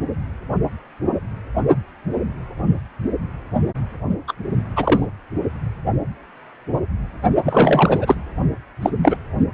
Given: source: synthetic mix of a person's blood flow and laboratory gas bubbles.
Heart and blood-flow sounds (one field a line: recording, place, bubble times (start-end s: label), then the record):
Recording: Doppler ultrasound of blood flow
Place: precordium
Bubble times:
4.28-4.33 s: bubbles
4.75-5.06 s: bubbles
7.45-8.15 s: bubbles
8.82-8.90 s: bubbles
9.03-9.17 s: bubbles
From the record:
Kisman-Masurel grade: 223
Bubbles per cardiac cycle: several, 3 to 8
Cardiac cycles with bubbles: 10 to 50%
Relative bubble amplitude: loud (0.450 to 0.775)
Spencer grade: 2 (many but less than half of the cardiac periods contain bubble signals, singularly or in groups)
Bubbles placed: only in the low amplitude regions of the cardiac cycle